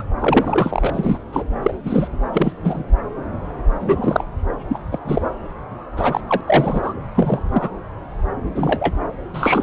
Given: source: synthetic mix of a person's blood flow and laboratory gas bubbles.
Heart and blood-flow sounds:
Doppler ultrasound of blood flow; subclavian vein
0.00-0.03 s: bubbles
0.19-1.19 s: bubbles
1.32-1.43 s: bubbles
1.62-1.72 s: bubbles
1.84-2.08 s: bubbles
2.33-2.52 s: bubbles
2.63-2.83 s: bubbles
3.80-4.25 s: bubbles
4.68-4.79 s: bubbles
4.92-4.99 s: bubbles
5.04-5.21 s: bubbles
5.96-6.21 s: bubbles
6.27-6.41 s: bubbles
6.47-6.94 s: bubbles
7.15-7.44 s: bubbles
7.51-7.70 s: bubbles
8.55-8.95 s: bubbles
9.34-9.63 s: bubbles
From the record:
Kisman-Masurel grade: 233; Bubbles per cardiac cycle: several, 3 to 8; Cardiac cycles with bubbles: 50 to 99%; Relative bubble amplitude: loud (0.450 to 0.775); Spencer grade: 3 (all of the cardiac periods contain showers or single bubble signals, but not dominating or overriding the cardiac motion signals); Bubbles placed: anywhere in the cardiac cycle

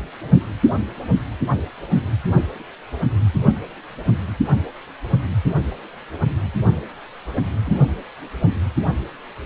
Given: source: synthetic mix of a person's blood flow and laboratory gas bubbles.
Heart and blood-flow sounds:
Doppler ultrasound of blood flow; precordium
7.65-7.85 s: bubbles
From the record:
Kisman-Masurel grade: 111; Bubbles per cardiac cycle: 1 to 2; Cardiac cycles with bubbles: 1 to 10%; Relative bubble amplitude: barely perceptible (0.100 to 0.250); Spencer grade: 1 (occasional bubble signal discernible with the cardiac motion signal, with majority of cardiac periods free of bubbles); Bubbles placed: anywhere in the cardiac cycle

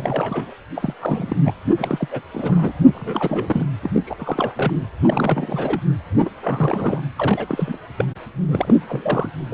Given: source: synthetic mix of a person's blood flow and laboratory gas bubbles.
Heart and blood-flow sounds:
Doppler ultrasound of blood flow; precordium
0.00-0.54 s: bubbles
0.76-0.93 s: bubbles
1.00-1.36 s: bubbles
1.45-1.53 s: bubbles
1.77-2.08 s: bubbles
2.11-2.21 s: bubbles
2.33-2.73 s: bubbles
2.85-3.65 s: bubbles
3.83-3.91 s: bubbles
3.94-4.02 s: bubbles
4.06-4.53 s: bubbles
4.56-4.74 s: bubbles
5.03-5.81 s: bubbles
6.26-6.29 s: bubbles
6.41-7.04 s: bubbles
7.18-7.78 s: bubbles
7.98-8.05 s: bubbles
8.49-8.76 s: bubbles
8.87-9.34 s: bubbles
9.50-9.53 s: bubbles
From the record:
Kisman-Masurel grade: 342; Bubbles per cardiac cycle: rolling drumbeat, 9 or more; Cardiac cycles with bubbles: 100%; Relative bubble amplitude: moderate (0.250 to 0.450); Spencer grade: 3 (all of the cardiac periods contain showers or single bubble signals, but not dominating or overriding the cardiac motion signals); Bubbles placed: anywhere in the cardiac cycle

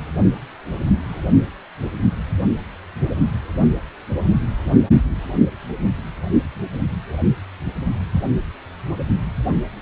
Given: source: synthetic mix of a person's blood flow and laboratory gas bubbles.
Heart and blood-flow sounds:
Doppler ultrasound of blood flow; precordium
1.09-1.22 s: bubbles
From the record:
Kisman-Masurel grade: 111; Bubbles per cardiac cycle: 1 to 2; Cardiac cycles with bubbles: 1 to 10%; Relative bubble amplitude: barely perceptible (0.100 to 0.250); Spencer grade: 1 (occasional bubble signal discernible with the cardiac motion signal, with majority of cardiac periods free of bubbles); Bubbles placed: only in the low amplitude regions of the cardiac cycle

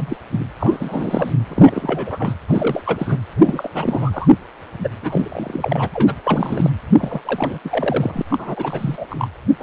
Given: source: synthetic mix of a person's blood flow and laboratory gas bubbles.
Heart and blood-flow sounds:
Doppler ultrasound of blood flow; precordium
0.00-0.16 s: bubbles
0.30-0.44 s: bubbles
0.59-1.33 s: bubbles
1.48-2.34 s: bubbles
2.48-3.17 s: bubbles
3.36-4.28 s: bubbles
4.79-4.88 s: bubbles
5.02-5.88 s: bubbles
5.93-6.16 s: bubbles
6.24-6.70 s: bubbles
6.98-7.22 s: bubbles
7.25-7.59 s: bubbles
7.65-8.22 s: bubbles
8.30-9.06 s: bubbles
9.09-9.27 s: bubbles
9.59-9.62 s: bubbles
From the record:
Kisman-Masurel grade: 342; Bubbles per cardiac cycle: rolling drumbeat, 9 or more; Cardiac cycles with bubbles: 100%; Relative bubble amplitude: moderate (0.250 to 0.450); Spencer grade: 3 (all of the cardiac periods contain showers or single bubble signals, but not dominating or overriding the cardiac motion signals); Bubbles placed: anywhere in the cardiac cycle

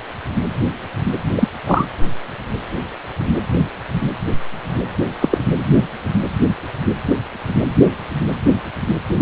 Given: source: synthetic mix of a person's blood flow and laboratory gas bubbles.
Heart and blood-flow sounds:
Doppler ultrasound of blood flow; precordium
1.35-1.48 s: bubbles
1.66-1.86 s: bubbles
5.21-5.38 s: bubbles
From the record:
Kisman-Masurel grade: 113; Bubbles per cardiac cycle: 1 to 2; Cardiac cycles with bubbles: 1 to 10%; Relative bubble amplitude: loud (0.450 to 0.775); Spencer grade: 1 (occasional bubble signal discernible with the cardiac motion signal, with majority of cardiac periods free of bubbles); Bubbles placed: anywhere in the cardiac cycle

